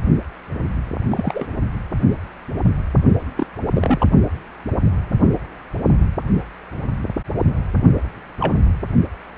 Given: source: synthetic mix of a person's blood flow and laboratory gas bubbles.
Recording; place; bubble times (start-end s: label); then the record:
Doppler ultrasound of blood flow; precordium
1.09-1.45 s: bubbles
3.35-3.46 s: bubbles
3.73-4.07 s: bubbles
8.40-8.54 s: bubbles
From the record:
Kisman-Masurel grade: 122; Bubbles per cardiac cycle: 1 to 2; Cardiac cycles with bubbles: 10 to 50%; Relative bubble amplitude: moderate (0.250 to 0.450); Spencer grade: 2 (many but less than half of the cardiac periods contain bubble signals, singularly or in groups); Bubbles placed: only in the low amplitude regions of the cardiac cycle